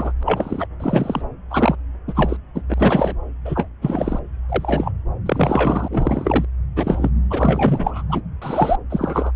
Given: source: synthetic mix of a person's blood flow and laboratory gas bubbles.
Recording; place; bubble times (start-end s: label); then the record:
Doppler ultrasound of blood flow; subclavian vein
0.00-0.12 s: bubbles
0.20-0.66 s: bubbles
0.79-1.22 s: bubbles
1.50-1.76 s: bubbles
2.08-2.37 s: bubbles
2.54-2.62 s: bubbles
2.69-2.74 s: bubbles
2.77-3.15 s: bubbles
3.45-3.68 s: bubbles
3.81-4.19 s: bubbles
4.48-4.92 s: bubbles
5.25-6.45 s: bubbles
6.75-7.10 s: bubbles
7.30-8.03 s: bubbles
8.09-8.21 s: bubbles
8.41-8.76 s: bubbles
8.89-9.31 s: bubbles
From the record:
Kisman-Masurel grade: 243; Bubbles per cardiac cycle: several, 3 to 8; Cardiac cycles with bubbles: 100%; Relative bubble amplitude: loud (0.450 to 0.775); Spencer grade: 3 (all of the cardiac periods contain showers or single bubble signals, but not dominating or overriding the cardiac motion signals); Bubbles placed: anywhere in the cardiac cycle